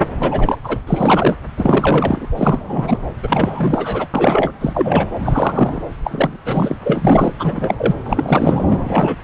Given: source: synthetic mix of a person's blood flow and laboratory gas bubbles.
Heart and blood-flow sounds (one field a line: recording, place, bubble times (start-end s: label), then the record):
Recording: Doppler ultrasound of blood flow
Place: subclavian vein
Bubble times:
0.20-0.57 s: bubbles
0.64-0.80 s: bubbles
0.87-1.36 s: bubbles
1.57-2.27 s: bubbles
2.35-2.97 s: bubbles
3.22-4.07 s: bubbles
4.14-4.53 s: bubbles
4.61-5.10 s: bubbles
5.24-5.82 s: bubbles
6.04-6.38 s: bubbles
6.45-6.77 s: bubbles
6.85-7.32 s: bubbles
7.39-7.95 s: bubbles
8.05-8.64 s: bubbles
8.69-8.79 s: bubbles
8.83-9.16 s: bubbles
From the record:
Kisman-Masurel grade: 343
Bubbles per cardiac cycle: rolling drumbeat, 9 or more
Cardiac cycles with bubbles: 100%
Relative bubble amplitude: loud (0.450 to 0.775)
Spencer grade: 3 (all of the cardiac periods contain showers or single bubble signals, but not dominating or overriding the cardiac motion signals)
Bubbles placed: anywhere in the cardiac cycle